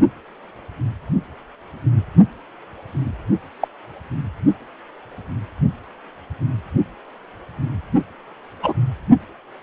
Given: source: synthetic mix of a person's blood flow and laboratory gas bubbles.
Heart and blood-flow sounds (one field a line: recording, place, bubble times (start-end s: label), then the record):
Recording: Doppler ultrasound of blood flow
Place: precordium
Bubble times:
3.60-3.68 s: bubbles
8.62-8.74 s: bubbles
From the record:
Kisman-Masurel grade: 123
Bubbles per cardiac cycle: 1 to 2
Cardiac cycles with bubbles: 10 to 50%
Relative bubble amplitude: loud (0.450 to 0.775)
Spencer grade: 2 (many but less than half of the cardiac periods contain bubble signals, singularly or in groups)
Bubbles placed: only in the low amplitude regions of the cardiac cycle